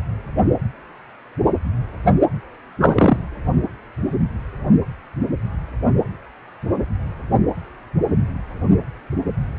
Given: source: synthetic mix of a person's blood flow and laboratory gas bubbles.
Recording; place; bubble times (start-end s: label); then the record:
Doppler ultrasound of blood flow; precordium
2.80-3.17 s: bubbles
From the record:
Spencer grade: 1 (occasional bubble signal discernible with the cardiac motion signal, with majority of cardiac periods free of bubbles); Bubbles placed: only in the low amplitude regions of the cardiac cycle